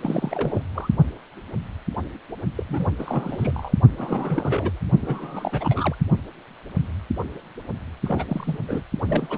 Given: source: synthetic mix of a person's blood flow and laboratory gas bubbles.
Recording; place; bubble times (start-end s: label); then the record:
Doppler ultrasound of blood flow; precordium
0.02-0.62 s: bubbles
0.75-0.89 s: bubbles
2.57-2.63 s: bubbles
2.69-2.88 s: bubbles
2.98-3.73 s: bubbles
3.98-4.81 s: bubbles
5.01-5.96 s: bubbles
8.04-8.24 s: bubbles
8.28-8.58 s: bubbles
8.68-8.81 s: bubbles
9.07-9.38 s: bubbles
From the record:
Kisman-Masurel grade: 332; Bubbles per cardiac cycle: rolling drumbeat, 9 or more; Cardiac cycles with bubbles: 50 to 99%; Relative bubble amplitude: moderate (0.250 to 0.450); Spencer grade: 3 (all of the cardiac periods contain showers or single bubble signals, but not dominating or overriding the cardiac motion signals); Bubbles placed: only in the low amplitude regions of the cardiac cycle